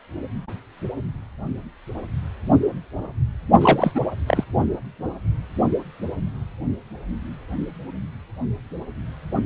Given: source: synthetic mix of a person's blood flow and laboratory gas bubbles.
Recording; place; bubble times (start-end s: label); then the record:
Doppler ultrasound of blood flow; precordium
3.60-3.92 s: bubbles
3.94-4.00 s: bubbles
4.28-4.44 s: bubbles
From the record:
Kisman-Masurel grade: 213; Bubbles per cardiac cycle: several, 3 to 8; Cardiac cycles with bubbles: 1 to 10%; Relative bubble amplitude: loud (0.450 to 0.775); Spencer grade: 1 (occasional bubble signal discernible with the cardiac motion signal, with majority of cardiac periods free of bubbles); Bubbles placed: only in the low amplitude regions of the cardiac cycle